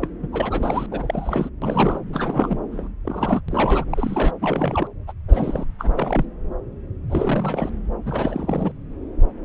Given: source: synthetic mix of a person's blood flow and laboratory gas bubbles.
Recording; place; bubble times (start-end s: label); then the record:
Doppler ultrasound of blood flow; subclavian vein
0.01-0.07 s: bubbles
0.22-0.28 s: bubbles
0.32-0.86 s: bubbles
0.91-1.49 s: bubbles
1.61-2.00 s: bubbles
2.12-2.56 s: bubbles
2.71-2.88 s: bubbles
3.04-3.41 s: bubbles
3.48-3.85 s: bubbles
3.91-4.31 s: bubbles
4.41-4.87 s: bubbles
5.07-5.12 s: bubbles
5.28-5.65 s: bubbles
5.79-6.26 s: bubbles
7.10-7.70 s: bubbles
8.05-8.72 s: bubbles
From the record:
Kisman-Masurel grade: 332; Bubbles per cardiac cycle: rolling drumbeat, 9 or more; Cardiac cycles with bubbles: 50 to 99%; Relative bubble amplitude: moderate (0.250 to 0.450); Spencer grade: 3 (all of the cardiac periods contain showers or single bubble signals, but not dominating or overriding the cardiac motion signals); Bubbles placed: anywhere in the cardiac cycle